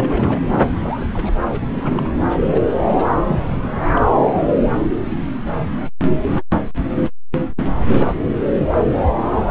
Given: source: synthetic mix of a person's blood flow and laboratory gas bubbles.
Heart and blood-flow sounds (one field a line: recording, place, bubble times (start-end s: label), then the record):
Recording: Doppler ultrasound of blood flow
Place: subclavian vein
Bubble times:
0.00-0.42 s: bubbles
0.59-1.07 s: bubbles
1.14-1.37 s: bubbles
1.47-2.15 s: bubbles
2.29-2.37 s: bubbles
2.51-2.63 s: bubbles
2.96-3.05 s: bubbles
3.27-3.76 s: bubbles
3.96-4.00 s: bubbles
7.87-8.17 s: bubbles
8.57-8.68 s: bubbles
8.71-8.85 s: bubbles
From the record:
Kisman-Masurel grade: 221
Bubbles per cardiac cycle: several, 3 to 8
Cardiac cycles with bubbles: 10 to 50%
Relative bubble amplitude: barely perceptible (0.100 to 0.250)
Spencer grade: 2 (many but less than half of the cardiac periods contain bubble signals, singularly or in groups)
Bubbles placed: anywhere in the cardiac cycle